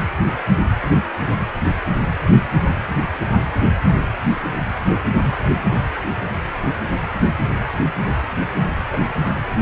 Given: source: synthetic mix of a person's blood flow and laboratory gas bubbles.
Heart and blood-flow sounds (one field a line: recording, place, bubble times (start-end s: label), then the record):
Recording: Doppler ultrasound of blood flow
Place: precordium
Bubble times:
8.93-8.98 s: bubbles
From the record:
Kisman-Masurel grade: 112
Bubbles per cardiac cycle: 1 to 2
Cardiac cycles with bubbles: 1 to 10%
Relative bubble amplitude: moderate (0.250 to 0.450)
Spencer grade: 1 (occasional bubble signal discernible with the cardiac motion signal, with majority of cardiac periods free of bubbles)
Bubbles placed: anywhere in the cardiac cycle